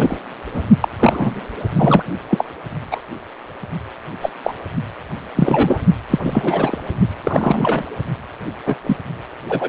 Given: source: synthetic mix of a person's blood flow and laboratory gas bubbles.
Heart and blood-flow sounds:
Doppler ultrasound of blood flow; precordium
0.00-0.17 s: bubbles
0.54-0.63 s: bubbles
0.80-0.88 s: bubbles
0.99-1.41 s: bubbles
1.76-2.03 s: bubbles
2.29-2.44 s: bubbles
2.91-3.00 s: bubbles
4.21-4.29 s: bubbles
4.43-4.53 s: bubbles
5.35-5.81 s: bubbles
6.10-6.20 s: bubbles
6.22-6.77 s: bubbles
7.24-7.84 s: bubbles
8.65-8.76 s: bubbles
8.83-8.96 s: bubbles
9.48-9.69 s: bubbles
From the record:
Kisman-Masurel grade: 243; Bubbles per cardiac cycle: several, 3 to 8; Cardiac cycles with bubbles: 100%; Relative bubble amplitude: loud (0.450 to 0.775); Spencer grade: 3 (all of the cardiac periods contain showers or single bubble signals, but not dominating or overriding the cardiac motion signals); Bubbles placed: only in the low amplitude regions of the cardiac cycle

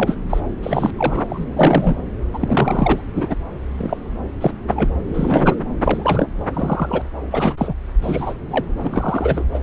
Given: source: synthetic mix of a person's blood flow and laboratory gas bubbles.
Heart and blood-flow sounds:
Doppler ultrasound of blood flow; subclavian vein
0.00-0.17 s: bubbles
0.30-0.41 s: bubbles
0.63-0.90 s: bubbles
0.97-1.46 s: bubbles
1.56-1.96 s: bubbles
2.33-3.01 s: bubbles
3.14-3.35 s: bubbles
3.78-3.95 s: bubbles
4.40-4.51 s: bubbles
4.67-4.96 s: bubbles
5.13-5.55 s: bubbles
5.84-6.28 s: bubbles
6.53-7.02 s: bubbles
7.30-7.54 s: bubbles
7.57-7.74 s: bubbles
8.01-8.34 s: bubbles
8.50-8.65 s: bubbles
8.78-9.45 s: bubbles
9.54-9.59 s: bubbles
From the record:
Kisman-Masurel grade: 243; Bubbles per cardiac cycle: several, 3 to 8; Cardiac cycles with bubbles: 100%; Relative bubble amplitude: loud (0.450 to 0.775); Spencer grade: 3 (all of the cardiac periods contain showers or single bubble signals, but not dominating or overriding the cardiac motion signals); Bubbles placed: anywhere in the cardiac cycle

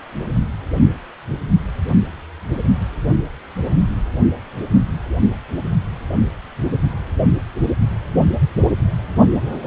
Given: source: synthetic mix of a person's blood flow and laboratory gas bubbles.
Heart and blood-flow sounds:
Doppler ultrasound of blood flow; precordium
no bubbles
From the record:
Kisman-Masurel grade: 000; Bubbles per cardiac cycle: 0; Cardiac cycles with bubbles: 0%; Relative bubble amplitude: no bubbles discernible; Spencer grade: 0 (complete lack of bubble signals)

